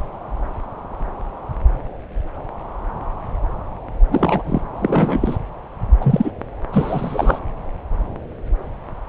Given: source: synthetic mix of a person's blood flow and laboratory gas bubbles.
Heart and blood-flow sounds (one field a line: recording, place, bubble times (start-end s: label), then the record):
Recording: Doppler ultrasound of blood flow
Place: subclavian vein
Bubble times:
4.11-4.43 s: bubbles
4.46-4.61 s: bubbles
4.75-5.36 s: bubbles
6.00-6.31 s: bubbles
6.72-7.39 s: bubbles
From the record:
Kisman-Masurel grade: 223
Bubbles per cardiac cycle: several, 3 to 8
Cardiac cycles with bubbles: 10 to 50%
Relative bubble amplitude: loud (0.450 to 0.775)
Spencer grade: 2 (many but less than half of the cardiac periods contain bubble signals, singularly or in groups)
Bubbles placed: anywhere in the cardiac cycle